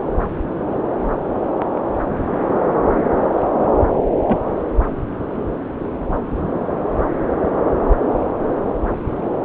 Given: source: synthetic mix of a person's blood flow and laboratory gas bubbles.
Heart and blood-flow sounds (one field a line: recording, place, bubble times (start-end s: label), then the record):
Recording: Doppler ultrasound of blood flow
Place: subclavian vein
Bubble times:
4.27-4.38 s: bubbles
From the record:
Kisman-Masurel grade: 112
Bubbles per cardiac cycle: 1 to 2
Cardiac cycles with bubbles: 1 to 10%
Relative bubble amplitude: moderate (0.250 to 0.450)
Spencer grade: 1 (occasional bubble signal discernible with the cardiac motion signal, with majority of cardiac periods free of bubbles)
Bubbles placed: anywhere in the cardiac cycle